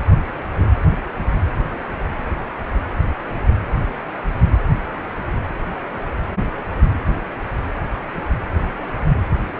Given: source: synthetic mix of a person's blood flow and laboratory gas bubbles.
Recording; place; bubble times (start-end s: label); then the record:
Doppler ultrasound of blood flow; precordium
no bubbles
From the record:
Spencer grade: 0 (complete lack of bubble signals)